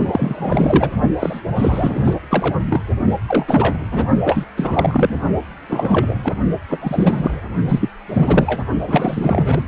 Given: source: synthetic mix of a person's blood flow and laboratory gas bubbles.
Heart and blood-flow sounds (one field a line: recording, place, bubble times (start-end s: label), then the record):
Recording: Doppler ultrasound of blood flow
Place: precordium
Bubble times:
0.00-0.91 s: bubbles
1.19-1.41 s: bubbles
1.55-2.14 s: bubbles
2.30-2.56 s: bubbles
2.67-2.81 s: bubbles
3.28-3.79 s: bubbles
3.92-4.05 s: bubbles
4.24-4.45 s: bubbles
4.57-5.16 s: bubbles
5.68-6.15 s: bubbles
6.23-6.35 s: bubbles
6.69-7.42 s: bubbles
7.68-7.90 s: bubbles
8.09-8.60 s: bubbles
8.87-9.63 s: bubbles
From the record:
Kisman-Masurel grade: 342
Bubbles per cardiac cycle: rolling drumbeat, 9 or more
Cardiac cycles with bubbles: 100%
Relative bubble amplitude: moderate (0.250 to 0.450)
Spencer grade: 3 (all of the cardiac periods contain showers or single bubble signals, but not dominating or overriding the cardiac motion signals)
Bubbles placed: only in the low amplitude regions of the cardiac cycle